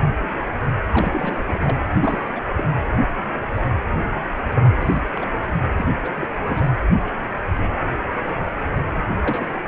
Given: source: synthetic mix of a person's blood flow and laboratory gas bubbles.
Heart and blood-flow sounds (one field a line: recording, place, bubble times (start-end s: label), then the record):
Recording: Doppler ultrasound of blood flow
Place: precordium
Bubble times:
0.86-1.77 s: bubbles
1.94-2.22 s: bubbles
2.35-2.41 s: bubbles
2.56-2.64 s: bubbles
4.53-4.71 s: bubbles
4.79-5.01 s: bubbles
5.08-5.30 s: bubbles
5.77-5.89 s: bubbles
6.04-6.10 s: bubbles
6.16-6.26 s: bubbles
6.46-6.69 s: bubbles
9.21-9.46 s: bubbles
From the record:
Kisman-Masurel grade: 222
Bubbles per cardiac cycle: several, 3 to 8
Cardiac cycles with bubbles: 10 to 50%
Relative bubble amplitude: moderate (0.250 to 0.450)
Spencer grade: 2 (many but less than half of the cardiac periods contain bubble signals, singularly or in groups)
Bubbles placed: anywhere in the cardiac cycle